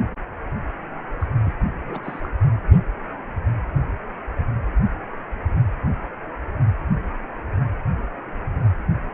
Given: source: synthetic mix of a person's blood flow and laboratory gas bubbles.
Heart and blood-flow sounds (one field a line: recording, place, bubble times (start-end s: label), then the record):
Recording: Doppler ultrasound of blood flow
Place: precordium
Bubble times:
1.21-1.27 s: bubbles
1.45-1.54 s: bubbles
1.77-2.20 s: bubbles
2.23-2.27 s: bubbles
From the record:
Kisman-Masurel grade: 211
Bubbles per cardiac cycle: several, 3 to 8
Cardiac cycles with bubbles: 1 to 10%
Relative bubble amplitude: barely perceptible (0.100 to 0.250)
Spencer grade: 1 (occasional bubble signal discernible with the cardiac motion signal, with majority of cardiac periods free of bubbles)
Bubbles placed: anywhere in the cardiac cycle